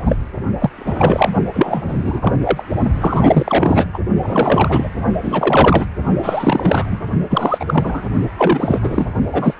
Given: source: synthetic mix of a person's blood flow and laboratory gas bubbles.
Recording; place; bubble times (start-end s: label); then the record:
Doppler ultrasound of blood flow; precordium
0.06-0.16 s: bubbles
0.59-0.70 s: bubbles
0.77-1.30 s: bubbles
1.53-2.32 s: bubbles
2.40-2.62 s: bubbles
3.00-3.86 s: bubbles
3.93-3.99 s: bubbles
4.22-4.89 s: bubbles
5.22-5.87 s: bubbles
6.22-6.86 s: bubbles
6.89-7.06 s: bubbles
7.30-8.09 s: bubbles
8.37-8.79 s: bubbles
8.82-9.06 s: bubbles
9.32-9.54 s: bubbles
From the record:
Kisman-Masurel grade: 333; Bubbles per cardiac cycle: rolling drumbeat, 9 or more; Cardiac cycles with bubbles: 50 to 99%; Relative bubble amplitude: loud (0.450 to 0.775); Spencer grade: 3 (all of the cardiac periods contain showers or single bubble signals, but not dominating or overriding the cardiac motion signals); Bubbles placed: only in the low amplitude regions of the cardiac cycle